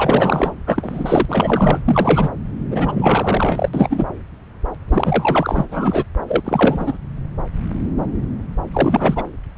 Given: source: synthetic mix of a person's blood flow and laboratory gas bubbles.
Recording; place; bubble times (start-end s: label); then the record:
Doppler ultrasound of blood flow; subclavian vein
0.00-0.53 s: bubbles
0.67-1.25 s: bubbles
1.28-1.81 s: bubbles
1.85-2.29 s: bubbles
2.71-3.69 s: bubbles
3.73-4.06 s: bubbles
4.88-5.65 s: bubbles
5.69-6.04 s: bubbles
6.28-6.41 s: bubbles
6.44-6.98 s: bubbles
8.73-9.24 s: bubbles
From the record:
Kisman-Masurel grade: 333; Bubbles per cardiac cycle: rolling drumbeat, 9 or more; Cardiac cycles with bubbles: 50 to 99%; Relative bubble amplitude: loud (0.450 to 0.775); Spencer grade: 3 (all of the cardiac periods contain showers or single bubble signals, but not dominating or overriding the cardiac motion signals); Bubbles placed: anywhere in the cardiac cycle